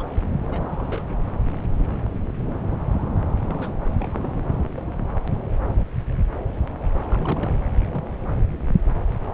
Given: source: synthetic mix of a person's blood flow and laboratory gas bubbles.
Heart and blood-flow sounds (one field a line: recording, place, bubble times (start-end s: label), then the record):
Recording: Doppler ultrasound of blood flow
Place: subclavian vein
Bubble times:
0.00-0.05 s: bubbles
0.42-1.09 s: bubbles
3.31-3.35 s: bubbles
3.38-3.76 s: bubbles
3.84-4.36 s: bubbles
7.09-7.58 s: bubbles
7.80-7.84 s: bubbles
7.92-8.20 s: bubbles
From the record:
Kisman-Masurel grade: 221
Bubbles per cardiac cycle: several, 3 to 8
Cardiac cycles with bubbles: 10 to 50%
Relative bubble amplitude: barely perceptible (0.100 to 0.250)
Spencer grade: 2 (many but less than half of the cardiac periods contain bubble signals, singularly or in groups)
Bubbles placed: anywhere in the cardiac cycle